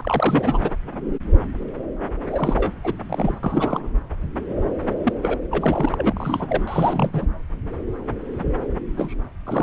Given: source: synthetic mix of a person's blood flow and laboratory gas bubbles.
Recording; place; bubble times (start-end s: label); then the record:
Doppler ultrasound of blood flow; subclavian vein
0.00-0.71 s: bubbles
2.31-2.72 s: bubbles
2.83-2.94 s: bubbles
3.09-3.35 s: bubbles
3.43-3.88 s: bubbles
5.03-5.12 s: bubbles
5.21-5.38 s: bubbles
5.51-5.89 s: bubbles
5.92-7.26 s: bubbles
8.96-9.14 s: bubbles
9.46-9.63 s: bubbles
From the record:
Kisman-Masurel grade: 332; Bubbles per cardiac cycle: rolling drumbeat, 9 or more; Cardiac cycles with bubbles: 50 to 99%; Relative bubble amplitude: moderate (0.250 to 0.450); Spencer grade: 3 (all of the cardiac periods contain showers or single bubble signals, but not dominating or overriding the cardiac motion signals); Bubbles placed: anywhere in the cardiac cycle